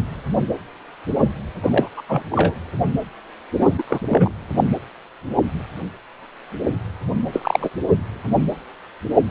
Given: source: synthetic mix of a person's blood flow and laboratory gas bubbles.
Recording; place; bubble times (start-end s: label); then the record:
Doppler ultrasound of blood flow; precordium
1.62-1.89 s: bubbles
1.97-2.01 s: bubbles
2.08-2.22 s: bubbles
2.32-2.54 s: bubbles
3.60-3.66 s: bubbles
3.77-3.83 s: bubbles
3.89-3.99 s: bubbles
4.08-4.31 s: bubbles
7.33-7.69 s: bubbles
From the record:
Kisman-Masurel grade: 223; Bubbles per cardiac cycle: several, 3 to 8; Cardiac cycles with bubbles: 10 to 50%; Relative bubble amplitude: loud (0.450 to 0.775); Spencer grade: 2 (many but less than half of the cardiac periods contain bubble signals, singularly or in groups); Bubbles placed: anywhere in the cardiac cycle